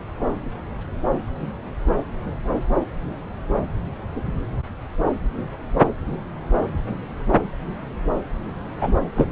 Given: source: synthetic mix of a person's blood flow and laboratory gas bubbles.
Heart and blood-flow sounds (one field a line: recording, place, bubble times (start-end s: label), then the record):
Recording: Doppler ultrasound of blood flow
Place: subclavian vein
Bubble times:
8.81-8.93 s: bubbles
9.16-9.28 s: bubbles
From the record:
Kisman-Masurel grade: 113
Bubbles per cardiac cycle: 1 to 2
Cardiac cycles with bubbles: 1 to 10%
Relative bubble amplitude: loud (0.450 to 0.775)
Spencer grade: 1 (occasional bubble signal discernible with the cardiac motion signal, with majority of cardiac periods free of bubbles)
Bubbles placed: anywhere in the cardiac cycle